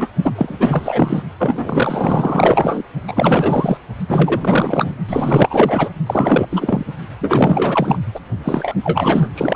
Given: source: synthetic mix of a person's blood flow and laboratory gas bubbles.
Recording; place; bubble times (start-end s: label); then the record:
Doppler ultrasound of blood flow; precordium
0.00-0.08 s: bubbles
0.22-0.32 s: bubbles
0.35-1.23 s: bubbles
1.39-2.83 s: bubbles
3.07-3.77 s: bubbles
4.08-4.96 s: bubbles
5.07-5.89 s: bubbles
6.06-6.46 s: bubbles
6.50-6.85 s: bubbles
7.21-7.99 s: bubbles
8.14-8.20 s: bubbles
8.44-8.74 s: bubbles
8.83-9.29 s: bubbles
9.34-9.56 s: bubbles
From the record:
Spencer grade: 4 (maximum detectable bubble signal sounding continuously throughout systole and diastole of every cardiac period, and overriding the amplitude of the normal cardiac signals); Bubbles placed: only in the low amplitude regions of the cardiac cycle